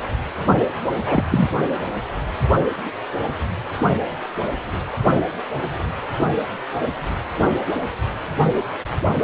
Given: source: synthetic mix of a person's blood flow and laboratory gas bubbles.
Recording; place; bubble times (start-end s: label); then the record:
Doppler ultrasound of blood flow; precordium
1.07-1.24 s: bubbles
1.31-1.48 s: bubbles
From the record:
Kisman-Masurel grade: 213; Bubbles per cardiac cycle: several, 3 to 8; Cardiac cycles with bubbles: 1 to 10%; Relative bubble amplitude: loud (0.450 to 0.775); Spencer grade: 1 (occasional bubble signal discernible with the cardiac motion signal, with majority of cardiac periods free of bubbles); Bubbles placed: anywhere in the cardiac cycle